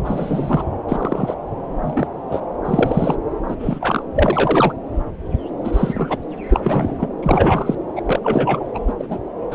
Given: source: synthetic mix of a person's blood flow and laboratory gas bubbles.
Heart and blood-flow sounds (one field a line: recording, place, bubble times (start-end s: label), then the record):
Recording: Doppler ultrasound of blood flow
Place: subclavian vein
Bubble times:
0.04-0.63 s: bubbles
0.88-1.35 s: bubbles
1.81-2.08 s: bubbles
2.31-2.41 s: bubbles
2.65-3.16 s: bubbles
3.50-3.56 s: bubbles
3.60-4.03 s: bubbles
4.15-4.73 s: bubbles
5.64-6.18 s: bubbles
6.50-7.08 s: bubbles
7.23-7.75 s: bubbles
7.96-8.01 s: bubbles
8.05-8.65 s: bubbles
8.74-8.79 s: bubbles
8.87-8.93 s: bubbles
8.98-9.18 s: bubbles
9.51-9.54 s: bubbles
From the record:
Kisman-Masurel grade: 233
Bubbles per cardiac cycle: several, 3 to 8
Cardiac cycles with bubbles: 50 to 99%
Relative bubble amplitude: loud (0.450 to 0.775)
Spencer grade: 3 (all of the cardiac periods contain showers or single bubble signals, but not dominating or overriding the cardiac motion signals)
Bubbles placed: anywhere in the cardiac cycle